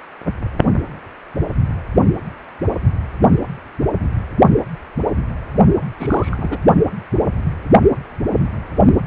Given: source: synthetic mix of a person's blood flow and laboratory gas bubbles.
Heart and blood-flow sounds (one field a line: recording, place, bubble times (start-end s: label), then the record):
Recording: Doppler ultrasound of blood flow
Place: precordium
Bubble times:
5.98-6.58 s: bubbles
From the record:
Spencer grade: 2 (many but less than half of the cardiac periods contain bubble signals, singularly or in groups)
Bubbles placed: only in the low amplitude regions of the cardiac cycle